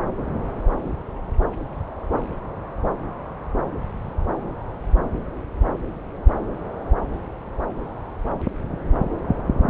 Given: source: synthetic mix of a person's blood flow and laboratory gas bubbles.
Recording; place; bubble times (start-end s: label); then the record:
Doppler ultrasound of blood flow; subclavian vein
no bubbles
From the record:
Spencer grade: 0 (complete lack of bubble signals)